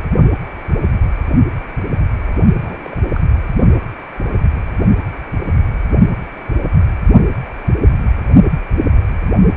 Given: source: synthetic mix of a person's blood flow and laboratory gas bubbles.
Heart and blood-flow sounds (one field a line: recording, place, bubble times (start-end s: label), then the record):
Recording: Doppler ultrasound of blood flow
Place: precordium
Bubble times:
2.55-2.97 s: bubbles
3.15-3.20 s: bubbles
From the record:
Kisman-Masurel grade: 221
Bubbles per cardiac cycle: several, 3 to 8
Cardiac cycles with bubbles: 10 to 50%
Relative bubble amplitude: barely perceptible (0.100 to 0.250)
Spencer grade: 2 (many but less than half of the cardiac periods contain bubble signals, singularly or in groups)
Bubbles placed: only in the low amplitude regions of the cardiac cycle